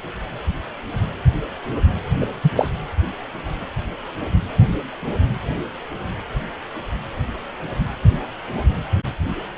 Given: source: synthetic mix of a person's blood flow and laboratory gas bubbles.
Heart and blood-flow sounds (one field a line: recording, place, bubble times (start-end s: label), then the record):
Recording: Doppler ultrasound of blood flow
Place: precordium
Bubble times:
2.20-2.26 s: bubbles
2.43-2.50 s: bubbles
2.55-2.67 s: bubbles
From the record:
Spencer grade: 1 (occasional bubble signal discernible with the cardiac motion signal, with majority of cardiac periods free of bubbles)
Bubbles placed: anywhere in the cardiac cycle